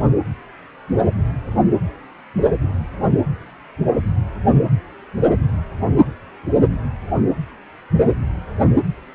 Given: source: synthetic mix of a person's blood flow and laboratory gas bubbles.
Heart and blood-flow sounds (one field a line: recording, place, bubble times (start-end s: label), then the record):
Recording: Doppler ultrasound of blood flow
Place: precordium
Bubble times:
no bubbles
From the record:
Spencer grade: 0 (complete lack of bubble signals)